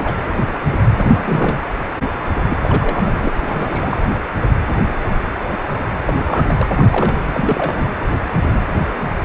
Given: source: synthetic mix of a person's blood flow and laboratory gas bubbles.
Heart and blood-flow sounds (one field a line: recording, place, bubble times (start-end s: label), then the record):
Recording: Doppler ultrasound of blood flow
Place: precordium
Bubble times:
0.00-0.14 s: bubbles
0.98-1.62 s: bubbles
2.48-2.58 s: bubbles
2.62-3.31 s: bubbles
3.35-4.01 s: bubbles
6.05-6.67 s: bubbles
6.78-7.20 s: bubbles
7.33-7.91 s: bubbles
From the record:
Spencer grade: 3 (all of the cardiac periods contain showers or single bubble signals, but not dominating or overriding the cardiac motion signals)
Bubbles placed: anywhere in the cardiac cycle